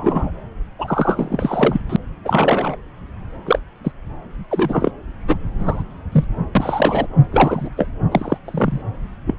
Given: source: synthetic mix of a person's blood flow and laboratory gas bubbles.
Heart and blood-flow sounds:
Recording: Doppler ultrasound of blood flow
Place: subclavian vein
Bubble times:
0.00-0.31 s: bubbles
0.79-1.80 s: bubbles
1.89-1.96 s: bubbles
2.24-2.76 s: bubbles
3.46-3.59 s: bubbles
3.84-3.92 s: bubbles
4.50-4.92 s: bubbles
5.27-5.37 s: bubbles
5.58-5.84 s: bubbles
6.12-6.25 s: bubbles
6.55-7.07 s: bubbles
7.31-7.69 s: bubbles
7.77-7.86 s: bubbles
8.11-8.38 s: bubbles
8.45-8.82 s: bubbles
9.26-9.35 s: bubbles
From the record:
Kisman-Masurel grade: 243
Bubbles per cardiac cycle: several, 3 to 8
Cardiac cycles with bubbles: 100%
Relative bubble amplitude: loud (0.450 to 0.775)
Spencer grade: 3 (all of the cardiac periods contain showers or single bubble signals, but not dominating or overriding the cardiac motion signals)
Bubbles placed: anywhere in the cardiac cycle

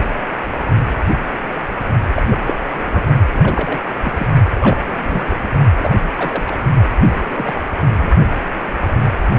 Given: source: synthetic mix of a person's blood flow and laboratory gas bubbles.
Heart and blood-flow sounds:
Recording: Doppler ultrasound of blood flow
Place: precordium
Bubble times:
2.16-2.22 s: bubbles
2.30-2.39 s: bubbles
2.44-2.53 s: bubbles
2.71-3.03 s: bubbles
3.34-3.80 s: bubbles
4.03-4.26 s: bubbles
4.61-5.34 s: bubbles
5.76-5.91 s: bubbles
6.17-6.44 s: bubbles
6.46-6.56 s: bubbles
7.06-7.53 s: bubbles
7.95-8.09 s: bubbles
From the record:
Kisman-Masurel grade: 222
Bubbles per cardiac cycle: several, 3 to 8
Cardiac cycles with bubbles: 10 to 50%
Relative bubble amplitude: moderate (0.250 to 0.450)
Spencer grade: 2 (many but less than half of the cardiac periods contain bubble signals, singularly or in groups)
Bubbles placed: only in the low amplitude regions of the cardiac cycle

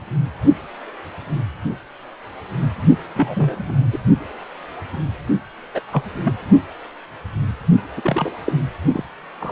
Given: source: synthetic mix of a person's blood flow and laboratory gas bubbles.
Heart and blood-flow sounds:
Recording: Doppler ultrasound of blood flow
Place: precordium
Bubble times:
3.15-3.86 s: bubbles
3.92-3.98 s: bubbles
5.75-5.80 s: bubbles
5.92-6.03 s: bubbles
6.24-6.33 s: bubbles
7.96-8.02 s: bubbles
8.04-8.32 s: bubbles
8.46-8.53 s: bubbles
8.87-9.03 s: bubbles
9.39-9.52 s: bubbles
From the record:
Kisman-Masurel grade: 222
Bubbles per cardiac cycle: several, 3 to 8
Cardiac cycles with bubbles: 10 to 50%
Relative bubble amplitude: moderate (0.250 to 0.450)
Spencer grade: 2 (many but less than half of the cardiac periods contain bubble signals, singularly or in groups)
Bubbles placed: only in the low amplitude regions of the cardiac cycle

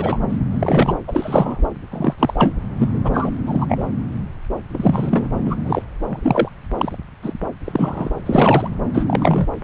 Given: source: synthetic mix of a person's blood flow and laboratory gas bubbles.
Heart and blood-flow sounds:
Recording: Doppler ultrasound of blood flow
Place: subclavian vein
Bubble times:
0.00-0.19 s: bubbles
0.29-0.38 s: bubbles
0.51-0.97 s: bubbles
1.08-1.68 s: bubbles
1.92-2.14 s: bubbles
2.18-2.54 s: bubbles
2.79-3.01 s: bubbles
3.04-3.31 s: bubbles
3.46-3.66 s: bubbles
3.69-3.84 s: bubbles
4.73-5.28 s: bubbles
5.44-5.56 s: bubbles
5.64-5.82 s: bubbles
6.06-6.49 s: bubbles
6.77-6.97 s: bubbles
7.22-7.33 s: bubbles
7.64-8.12 s: bubbles
8.25-8.68 s: bubbles
8.93-9.47 s: bubbles
9.61-9.64 s: bubbles
From the record:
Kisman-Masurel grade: 243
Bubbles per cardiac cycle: several, 3 to 8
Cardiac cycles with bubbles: 100%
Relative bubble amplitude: loud (0.450 to 0.775)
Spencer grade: 3 (all of the cardiac periods contain showers or single bubble signals, but not dominating or overriding the cardiac motion signals)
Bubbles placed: anywhere in the cardiac cycle

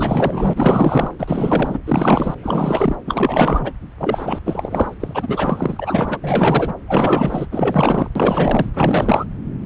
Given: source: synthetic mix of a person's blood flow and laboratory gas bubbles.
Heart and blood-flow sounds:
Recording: Doppler ultrasound of blood flow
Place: subclavian vein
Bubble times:
0.00-1.11 s: bubbles
1.19-1.79 s: bubbles
1.86-2.35 s: bubbles
2.42-2.96 s: bubbles
3.06-3.74 s: bubbles
3.99-4.41 s: bubbles
4.45-4.95 s: bubbles
5.00-6.18 s: bubbles
6.21-6.73 s: bubbles
6.87-7.46 s: bubbles
7.51-8.08 s: bubbles
8.15-8.70 s: bubbles
8.74-9.26 s: bubbles
From the record:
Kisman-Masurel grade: 444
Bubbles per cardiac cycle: continuous sound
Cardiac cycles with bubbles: 100%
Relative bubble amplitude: maximal (0.775 to 0.999)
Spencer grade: 4 (maximum detectable bubble signal sounding continuously throughout systole and diastole of every cardiac period, and overriding the amplitude of the normal cardiac signals)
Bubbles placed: anywhere in the cardiac cycle

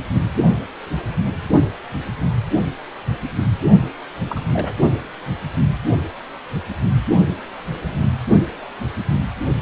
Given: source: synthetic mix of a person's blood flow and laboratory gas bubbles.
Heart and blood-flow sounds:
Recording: Doppler ultrasound of blood flow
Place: precordium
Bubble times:
4.27-4.43 s: bubbles
4.51-4.75 s: bubbles
From the record:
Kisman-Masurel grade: 211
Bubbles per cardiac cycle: several, 3 to 8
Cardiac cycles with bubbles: 1 to 10%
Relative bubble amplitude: barely perceptible (0.100 to 0.250)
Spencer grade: 1 (occasional bubble signal discernible with the cardiac motion signal, with majority of cardiac periods free of bubbles)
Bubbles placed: only in the low amplitude regions of the cardiac cycle

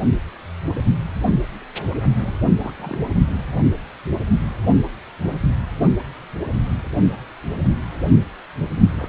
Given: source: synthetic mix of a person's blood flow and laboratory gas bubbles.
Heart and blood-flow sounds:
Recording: Doppler ultrasound of blood flow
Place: precordium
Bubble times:
2.21-2.38 s: bubbles
2.56-2.98 s: bubbles
8.92-9.09 s: bubbles
From the record:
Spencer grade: 2 (many but less than half of the cardiac periods contain bubble signals, singularly or in groups)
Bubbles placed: only in the low amplitude regions of the cardiac cycle

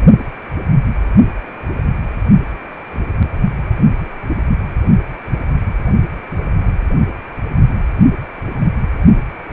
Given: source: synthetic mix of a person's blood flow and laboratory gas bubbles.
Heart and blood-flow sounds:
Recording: Doppler ultrasound of blood flow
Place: precordium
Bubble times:
no bubbles
From the record:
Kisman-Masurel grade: 000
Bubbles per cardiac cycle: 0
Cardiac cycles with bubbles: 0%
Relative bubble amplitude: no bubbles discernible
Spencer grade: 0 (complete lack of bubble signals)

